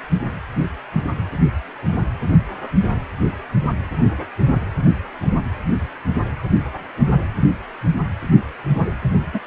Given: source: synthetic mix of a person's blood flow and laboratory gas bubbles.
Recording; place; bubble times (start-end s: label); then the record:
Doppler ultrasound of blood flow; precordium
9.33-9.39 s: bubbles
From the record:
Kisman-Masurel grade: 112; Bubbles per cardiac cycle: 1 to 2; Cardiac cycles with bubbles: 1 to 10%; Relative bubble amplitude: moderate (0.250 to 0.450); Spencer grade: 1 (occasional bubble signal discernible with the cardiac motion signal, with majority of cardiac periods free of bubbles); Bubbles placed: anywhere in the cardiac cycle